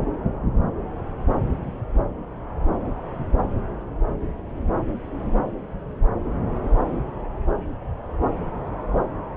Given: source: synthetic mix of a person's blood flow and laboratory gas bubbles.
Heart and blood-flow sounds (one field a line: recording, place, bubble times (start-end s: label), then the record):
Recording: Doppler ultrasound of blood flow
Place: subclavian vein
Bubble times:
no bubbles
From the record:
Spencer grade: 0 (complete lack of bubble signals)